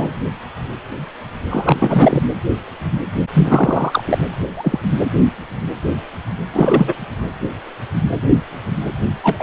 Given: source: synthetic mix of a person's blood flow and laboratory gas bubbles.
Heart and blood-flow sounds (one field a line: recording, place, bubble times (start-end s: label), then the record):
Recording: Doppler ultrasound of blood flow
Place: precordium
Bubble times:
0.00-0.13 s: bubbles
1.51-2.23 s: bubbles
3.33-4.18 s: bubbles
4.42-4.45 s: bubbles
4.57-4.79 s: bubbles
6.54-6.93 s: bubbles
9.23-9.43 s: bubbles
From the record:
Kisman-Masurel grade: 223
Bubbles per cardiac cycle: several, 3 to 8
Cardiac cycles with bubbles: 10 to 50%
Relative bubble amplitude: loud (0.450 to 0.775)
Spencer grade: 2 (many but less than half of the cardiac periods contain bubble signals, singularly or in groups)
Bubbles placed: anywhere in the cardiac cycle